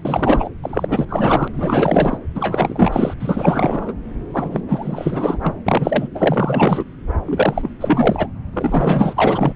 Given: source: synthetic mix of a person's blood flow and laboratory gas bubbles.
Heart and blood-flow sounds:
Doppler ultrasound of blood flow; subclavian vein
0.05-0.49 s: bubbles
0.62-1.05 s: bubbles
1.09-1.48 s: bubbles
1.53-2.19 s: bubbles
2.35-3.14 s: bubbles
3.19-3.94 s: bubbles
4.33-4.61 s: bubbles
4.69-5.38 s: bubbles
5.42-5.53 s: bubbles
5.66-6.08 s: bubbles
6.15-6.85 s: bubbles
7.26-7.70 s: bubbles
7.81-8.27 s: bubbles
8.53-9.53 s: bubbles
From the record:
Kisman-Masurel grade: 444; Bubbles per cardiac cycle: continuous sound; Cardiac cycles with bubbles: 100%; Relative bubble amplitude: maximal (0.775 to 0.999); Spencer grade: 4 (maximum detectable bubble signal sounding continuously throughout systole and diastole of every cardiac period, and overriding the amplitude of the normal cardiac signals); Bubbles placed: anywhere in the cardiac cycle

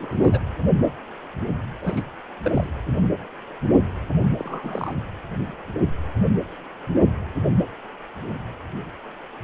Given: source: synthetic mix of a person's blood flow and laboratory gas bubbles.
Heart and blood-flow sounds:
Doppler ultrasound of blood flow; precordium
0.00-0.39 s: bubbles
1.82-2.02 s: bubbles
2.43-2.67 s: bubbles
4.38-4.92 s: bubbles
From the record:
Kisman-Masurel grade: 221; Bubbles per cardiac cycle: several, 3 to 8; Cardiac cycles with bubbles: 10 to 50%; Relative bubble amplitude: barely perceptible (0.100 to 0.250); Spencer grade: 2 (many but less than half of the cardiac periods contain bubble signals, singularly or in groups); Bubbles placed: anywhere in the cardiac cycle

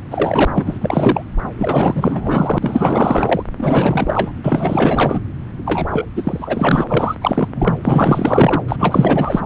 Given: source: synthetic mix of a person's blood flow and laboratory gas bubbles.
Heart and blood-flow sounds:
Doppler ultrasound of blood flow; subclavian vein
0.10-0.45 s: bubbles
0.54-0.78 s: bubbles
0.81-1.23 s: bubbles
1.57-2.58 s: bubbles
2.61-3.43 s: bubbles
3.57-4.32 s: bubbles
4.44-5.20 s: bubbles
5.65-5.87 s: bubbles
5.90-6.06 s: bubbles
6.16-6.84 s: bubbles
6.88-7.15 s: bubbles
7.21-7.48 s: bubbles
7.54-7.78 s: bubbles
7.84-8.62 s: bubbles
8.68-8.76 s: bubbles
8.79-9.40 s: bubbles
From the record:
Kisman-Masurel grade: 444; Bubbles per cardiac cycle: continuous sound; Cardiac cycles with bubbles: 100%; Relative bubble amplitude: maximal (0.775 to 0.999); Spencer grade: 4 (maximum detectable bubble signal sounding continuously throughout systole and diastole of every cardiac period, and overriding the amplitude of the normal cardiac signals); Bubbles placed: anywhere in the cardiac cycle

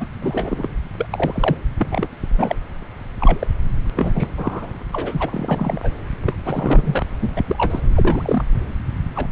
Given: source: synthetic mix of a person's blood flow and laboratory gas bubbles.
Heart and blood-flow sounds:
Doppler ultrasound of blood flow; subclavian vein
0.00-0.05 s: bubbles
0.22-0.68 s: bubbles
0.97-1.06 s: bubbles
1.10-1.57 s: bubbles
1.79-2.09 s: bubbles
2.38-2.56 s: bubbles
3.20-3.47 s: bubbles
3.84-3.87 s: bubbles
3.96-4.12 s: bubbles
4.15-4.28 s: bubbles
4.38-4.69 s: bubbles
4.92-5.92 s: bubbles
6.21-6.34 s: bubbles
6.44-7.04 s: bubbles
7.19-7.43 s: bubbles
7.48-7.80 s: bubbles
7.95-8.44 s: bubbles
9.15-9.28 s: bubbles
From the record:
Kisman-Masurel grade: 242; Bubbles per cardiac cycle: several, 3 to 8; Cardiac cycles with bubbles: 100%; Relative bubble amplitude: moderate (0.250 to 0.450); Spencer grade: 3 (all of the cardiac periods contain showers or single bubble signals, but not dominating or overriding the cardiac motion signals); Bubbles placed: anywhere in the cardiac cycle

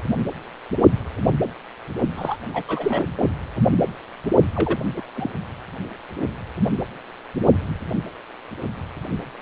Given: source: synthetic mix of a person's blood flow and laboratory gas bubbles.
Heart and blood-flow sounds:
Doppler ultrasound of blood flow; precordium
2.17-2.36 s: bubbles
2.53-2.64 s: bubbles
2.68-3.06 s: bubbles
4.53-4.79 s: bubbles
4.96-5.02 s: bubbles
5.15-5.30 s: bubbles
From the record:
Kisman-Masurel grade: 222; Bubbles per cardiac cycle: several, 3 to 8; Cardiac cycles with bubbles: 10 to 50%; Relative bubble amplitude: moderate (0.250 to 0.450); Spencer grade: 2 (many but less than half of the cardiac periods contain bubble signals, singularly or in groups); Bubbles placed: only in the low amplitude regions of the cardiac cycle

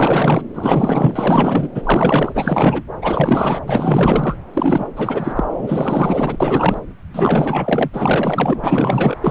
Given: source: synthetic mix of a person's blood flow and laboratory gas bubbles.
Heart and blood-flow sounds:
Doppler ultrasound of blood flow; subclavian vein
0.00-0.42 s: bubbles
0.54-1.68 s: bubbles
1.74-2.83 s: bubbles
3.01-3.60 s: bubbles
3.66-4.36 s: bubbles
4.54-4.87 s: bubbles
4.96-5.44 s: bubbles
5.58-6.37 s: bubbles
6.40-6.81 s: bubbles
7.13-8.61 s: bubbles
8.64-9.16 s: bubbles
9.21-9.31 s: bubbles
From the record:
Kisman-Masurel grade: 444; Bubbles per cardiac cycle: continuous sound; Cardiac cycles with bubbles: 100%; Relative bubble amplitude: maximal (0.775 to 0.999); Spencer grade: 4 (maximum detectable bubble signal sounding continuously throughout systole and diastole of every cardiac period, and overriding the amplitude of the normal cardiac signals); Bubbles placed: anywhere in the cardiac cycle

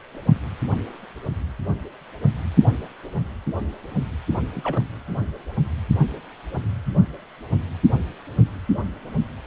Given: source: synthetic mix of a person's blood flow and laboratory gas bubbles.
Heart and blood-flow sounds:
Doppler ultrasound of blood flow; precordium
4.55-4.85 s: bubbles
From the record:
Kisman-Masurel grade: 211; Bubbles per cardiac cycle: several, 3 to 8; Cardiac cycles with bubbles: 1 to 10%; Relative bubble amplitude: barely perceptible (0.100 to 0.250); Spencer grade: 1 (occasional bubble signal discernible with the cardiac motion signal, with majority of cardiac periods free of bubbles); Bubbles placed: anywhere in the cardiac cycle

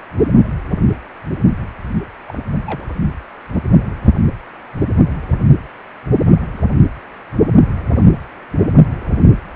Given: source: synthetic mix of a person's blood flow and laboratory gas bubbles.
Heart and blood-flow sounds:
Doppler ultrasound of blood flow; precordium
2.28-2.40 s: bubbles
2.66-2.85 s: bubbles
From the record:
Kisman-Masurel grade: 111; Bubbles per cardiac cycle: 1 to 2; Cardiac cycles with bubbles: 1 to 10%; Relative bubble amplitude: barely perceptible (0.100 to 0.250); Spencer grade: 1 (occasional bubble signal discernible with the cardiac motion signal, with majority of cardiac periods free of bubbles); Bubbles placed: only in the low amplitude regions of the cardiac cycle

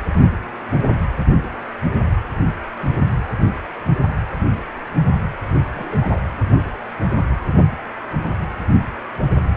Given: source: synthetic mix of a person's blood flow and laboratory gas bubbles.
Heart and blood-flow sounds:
Doppler ultrasound of blood flow; precordium
5.74-6.21 s: bubbles
From the record:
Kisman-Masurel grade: 121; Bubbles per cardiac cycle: 1 to 2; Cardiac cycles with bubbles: 10 to 50%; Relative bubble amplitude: barely perceptible (0.100 to 0.250); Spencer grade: 2 (many but less than half of the cardiac periods contain bubble signals, singularly or in groups); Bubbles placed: only in the low amplitude regions of the cardiac cycle

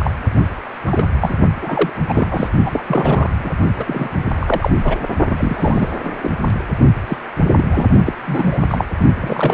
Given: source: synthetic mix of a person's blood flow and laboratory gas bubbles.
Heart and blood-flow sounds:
Doppler ultrasound of blood flow; precordium
0.00-0.10 s: bubbles
0.86-1.04 s: bubbles
1.21-1.34 s: bubbles
1.62-1.90 s: bubbles
2.08-2.28 s: bubbles
2.30-2.49 s: bubbles
2.64-2.82 s: bubbles
2.87-3.30 s: bubbles
3.39-3.50 s: bubbles
3.77-4.09 s: bubbles
4.35-4.71 s: bubbles
4.84-5.02 s: bubbles
5.29-5.89 s: bubbles
6.04-6.29 s: bubbles
7.07-7.18 s: bubbles
7.56-7.64 s: bubbles
7.72-7.86 s: bubbles
8.06-8.13 s: bubbles
8.26-8.59 s: bubbles
8.69-8.86 s: bubbles
9.20-9.53 s: bubbles
From the record:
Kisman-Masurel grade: 243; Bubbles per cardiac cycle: several, 3 to 8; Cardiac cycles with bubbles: 100%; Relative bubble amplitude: loud (0.450 to 0.775); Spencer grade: 3 (all of the cardiac periods contain showers or single bubble signals, but not dominating or overriding the cardiac motion signals); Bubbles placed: only in the low amplitude regions of the cardiac cycle

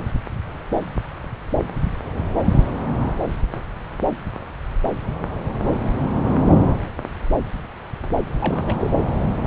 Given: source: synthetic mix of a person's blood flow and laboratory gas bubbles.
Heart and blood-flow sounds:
Doppler ultrasound of blood flow; subclavian vein
8.38-8.76 s: bubbles
8.79-8.90 s: bubbles
From the record:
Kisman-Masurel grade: 211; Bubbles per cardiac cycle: several, 3 to 8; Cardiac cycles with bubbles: 1 to 10%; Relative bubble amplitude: barely perceptible (0.100 to 0.250); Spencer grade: 1 (occasional bubble signal discernible with the cardiac motion signal, with majority of cardiac periods free of bubbles); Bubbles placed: anywhere in the cardiac cycle

